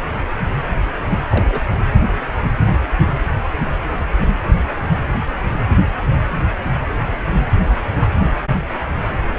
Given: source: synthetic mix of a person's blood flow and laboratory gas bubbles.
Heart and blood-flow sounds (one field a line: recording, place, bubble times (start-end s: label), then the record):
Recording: Doppler ultrasound of blood flow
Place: precordium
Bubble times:
1.29-1.44 s: bubbles
1.50-1.60 s: bubbles
1.72-1.77 s: bubbles
From the record:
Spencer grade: 1 (occasional bubble signal discernible with the cardiac motion signal, with majority of cardiac periods free of bubbles)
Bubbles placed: anywhere in the cardiac cycle